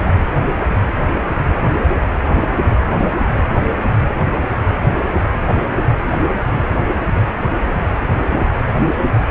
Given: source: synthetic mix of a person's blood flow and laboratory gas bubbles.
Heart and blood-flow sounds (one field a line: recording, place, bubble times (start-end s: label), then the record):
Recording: Doppler ultrasound of blood flow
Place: precordium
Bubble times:
2.40-2.48 s: bubbles
From the record:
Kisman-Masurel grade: 112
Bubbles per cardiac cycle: 1 to 2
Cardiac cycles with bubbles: 1 to 10%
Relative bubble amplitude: moderate (0.250 to 0.450)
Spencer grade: 1 (occasional bubble signal discernible with the cardiac motion signal, with majority of cardiac periods free of bubbles)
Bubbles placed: anywhere in the cardiac cycle